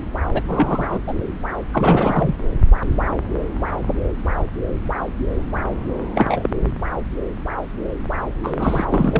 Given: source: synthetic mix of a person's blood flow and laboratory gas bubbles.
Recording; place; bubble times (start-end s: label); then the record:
Doppler ultrasound of blood flow; subclavian vein
0.34-0.42 s: bubbles
0.47-0.99 s: bubbles
1.07-1.14 s: bubbles
1.72-2.35 s: bubbles
6.15-6.50 s: bubbles
8.43-8.85 s: bubbles
8.92-9.20 s: bubbles
From the record:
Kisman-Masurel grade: 223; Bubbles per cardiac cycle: several, 3 to 8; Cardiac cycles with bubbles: 10 to 50%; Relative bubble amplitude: loud (0.450 to 0.775); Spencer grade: 2 (many but less than half of the cardiac periods contain bubble signals, singularly or in groups); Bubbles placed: anywhere in the cardiac cycle